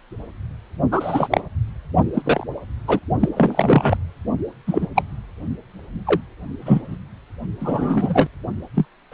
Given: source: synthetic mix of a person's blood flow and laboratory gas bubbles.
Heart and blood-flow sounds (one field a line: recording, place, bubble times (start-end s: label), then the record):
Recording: Doppler ultrasound of blood flow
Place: precordium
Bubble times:
0.92-1.41 s: bubbles
2.13-2.44 s: bubbles
2.88-2.99 s: bubbles
3.19-3.29 s: bubbles
3.36-3.97 s: bubbles
4.67-4.87 s: bubbles
4.95-5.03 s: bubbles
6.07-6.21 s: bubbles
6.61-6.98 s: bubbles
7.60-8.27 s: bubbles
8.75-8.85 s: bubbles
9.12-9.14 s: bubbles
From the record:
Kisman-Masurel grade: 233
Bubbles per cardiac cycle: several, 3 to 8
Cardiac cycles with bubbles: 50 to 99%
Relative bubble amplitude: loud (0.450 to 0.775)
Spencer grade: 3 (all of the cardiac periods contain showers or single bubble signals, but not dominating or overriding the cardiac motion signals)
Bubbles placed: only in the low amplitude regions of the cardiac cycle